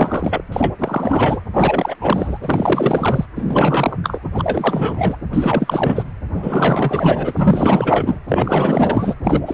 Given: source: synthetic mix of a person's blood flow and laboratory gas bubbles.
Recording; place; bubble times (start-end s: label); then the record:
Doppler ultrasound of blood flow; precordium
0.00-0.42 s: bubbles
0.52-0.74 s: bubbles
0.79-1.41 s: bubbles
1.53-1.95 s: bubbles
2.00-2.38 s: bubbles
2.42-3.25 s: bubbles
3.35-3.97 s: bubbles
4.03-4.18 s: bubbles
4.34-5.17 s: bubbles
5.33-6.04 s: bubbles
6.33-8.19 s: bubbles
8.28-9.15 s: bubbles
9.24-9.42 s: bubbles
9.46-9.54 s: bubbles
From the record:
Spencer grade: 4 (maximum detectable bubble signal sounding continuously throughout systole and diastole of every cardiac period, and overriding the amplitude of the normal cardiac signals); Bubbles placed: anywhere in the cardiac cycle